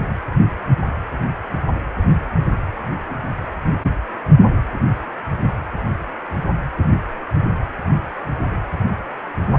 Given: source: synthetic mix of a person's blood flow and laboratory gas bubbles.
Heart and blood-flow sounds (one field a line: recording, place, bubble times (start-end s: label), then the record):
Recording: Doppler ultrasound of blood flow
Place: precordium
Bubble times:
no bubbles
From the record:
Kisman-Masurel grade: 000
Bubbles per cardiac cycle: 0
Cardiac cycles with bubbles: 0%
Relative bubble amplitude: no bubbles discernible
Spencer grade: 0 (complete lack of bubble signals)